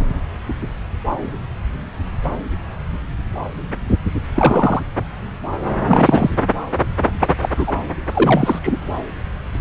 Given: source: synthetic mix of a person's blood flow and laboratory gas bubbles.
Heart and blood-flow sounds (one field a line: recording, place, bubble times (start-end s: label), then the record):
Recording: Doppler ultrasound of blood flow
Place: subclavian vein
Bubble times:
4.34-4.82 s: bubbles
5.88-6.30 s: bubbles
7.19-7.27 s: bubbles
7.42-7.49 s: bubbles
7.56-7.72 s: bubbles
8.15-8.77 s: bubbles
From the record:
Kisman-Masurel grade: 223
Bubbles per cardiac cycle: several, 3 to 8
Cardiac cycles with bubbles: 10 to 50%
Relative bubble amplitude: loud (0.450 to 0.775)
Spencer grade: 2 (many but less than half of the cardiac periods contain bubble signals, singularly or in groups)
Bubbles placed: anywhere in the cardiac cycle